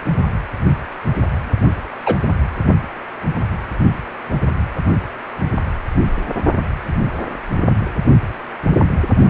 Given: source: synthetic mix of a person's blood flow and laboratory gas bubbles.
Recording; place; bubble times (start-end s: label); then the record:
Doppler ultrasound of blood flow; precordium
2.06-2.15 s: bubbles
From the record:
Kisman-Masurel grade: 113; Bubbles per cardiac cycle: 1 to 2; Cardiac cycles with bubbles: 1 to 10%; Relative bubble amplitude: loud (0.450 to 0.775); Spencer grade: 1 (occasional bubble signal discernible with the cardiac motion signal, with majority of cardiac periods free of bubbles); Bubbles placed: only in the low amplitude regions of the cardiac cycle